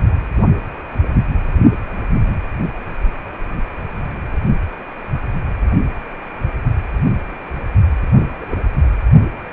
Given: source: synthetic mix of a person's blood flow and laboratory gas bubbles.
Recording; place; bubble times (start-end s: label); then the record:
Doppler ultrasound of blood flow; precordium
8.16-8.22 s: bubbles
8.40-8.57 s: bubbles
From the record:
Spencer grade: 2 (many but less than half of the cardiac periods contain bubble signals, singularly or in groups); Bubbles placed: only in the low amplitude regions of the cardiac cycle